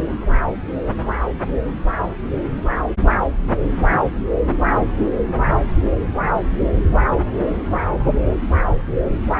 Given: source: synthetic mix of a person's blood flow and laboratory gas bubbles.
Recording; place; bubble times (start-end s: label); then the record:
Doppler ultrasound of blood flow; subclavian vein
no bubbles
From the record:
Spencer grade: 0 (complete lack of bubble signals)